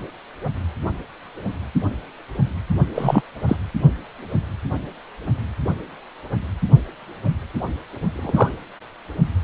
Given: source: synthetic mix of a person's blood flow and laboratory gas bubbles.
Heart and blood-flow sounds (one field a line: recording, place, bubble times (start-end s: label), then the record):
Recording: Doppler ultrasound of blood flow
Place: precordium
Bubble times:
2.94-3.21 s: bubbles
3.48-3.56 s: bubbles
8.12-8.55 s: bubbles
From the record:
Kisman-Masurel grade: 123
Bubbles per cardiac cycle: 1 to 2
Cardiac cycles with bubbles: 10 to 50%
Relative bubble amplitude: loud (0.450 to 0.775)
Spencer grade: 2 (many but less than half of the cardiac periods contain bubble signals, singularly or in groups)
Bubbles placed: only in the low amplitude regions of the cardiac cycle